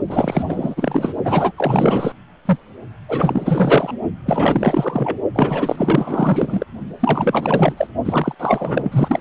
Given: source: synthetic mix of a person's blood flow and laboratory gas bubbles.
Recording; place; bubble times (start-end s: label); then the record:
Doppler ultrasound of blood flow; precordium
0.07-1.12 s: bubbles
1.25-1.52 s: bubbles
1.56-2.12 s: bubbles
2.45-2.58 s: bubbles
3.08-3.93 s: bubbles
4.25-5.21 s: bubbles
5.35-6.65 s: bubbles
7.00-7.87 s: bubbles
8.05-8.35 s: bubbles
8.39-9.21 s: bubbles
From the record:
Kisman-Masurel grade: 444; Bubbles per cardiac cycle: continuous sound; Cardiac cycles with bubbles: 100%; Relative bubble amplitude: maximal (0.775 to 0.999); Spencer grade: 4 (maximum detectable bubble signal sounding continuously throughout systole and diastole of every cardiac period, and overriding the amplitude of the normal cardiac signals); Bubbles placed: only in the low amplitude regions of the cardiac cycle